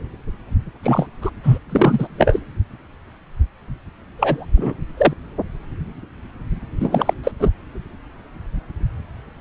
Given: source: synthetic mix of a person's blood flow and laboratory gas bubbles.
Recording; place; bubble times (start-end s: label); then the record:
Doppler ultrasound of blood flow; subclavian vein
0.82-1.07 s: bubbles
1.22-1.30 s: bubbles
1.43-1.58 s: bubbles
1.69-2.08 s: bubbles
2.17-2.40 s: bubbles
4.17-4.46 s: bubbles
4.56-4.73 s: bubbles
4.97-5.13 s: bubbles
6.79-7.13 s: bubbles
7.23-7.31 s: bubbles
7.39-7.49 s: bubbles
From the record:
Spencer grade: 2 (many but less than half of the cardiac periods contain bubble signals, singularly or in groups); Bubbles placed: anywhere in the cardiac cycle